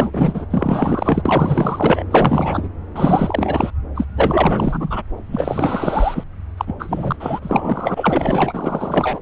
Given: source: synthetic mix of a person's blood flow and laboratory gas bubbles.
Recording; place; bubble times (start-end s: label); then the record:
Doppler ultrasound of blood flow; subclavian vein
0.00-0.47 s: bubbles
0.50-1.22 s: bubbles
1.25-2.04 s: bubbles
2.10-2.69 s: bubbles
2.96-3.71 s: bubbles
3.94-4.06 s: bubbles
4.15-5.02 s: bubbles
5.26-6.24 s: bubbles
6.57-6.74 s: bubbles
6.79-7.16 s: bubbles
7.19-9.19 s: bubbles
From the record:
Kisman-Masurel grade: 444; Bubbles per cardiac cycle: continuous sound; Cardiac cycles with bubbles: 100%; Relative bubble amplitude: maximal (0.775 to 0.999); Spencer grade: 4 (maximum detectable bubble signal sounding continuously throughout systole and diastole of every cardiac period, and overriding the amplitude of the normal cardiac signals); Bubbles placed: anywhere in the cardiac cycle